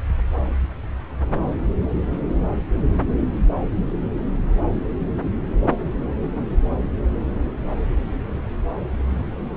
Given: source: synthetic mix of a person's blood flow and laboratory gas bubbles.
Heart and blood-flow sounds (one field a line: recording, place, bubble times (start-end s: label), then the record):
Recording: Doppler ultrasound of blood flow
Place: subclavian vein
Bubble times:
no bubbles
From the record:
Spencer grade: 0 (complete lack of bubble signals)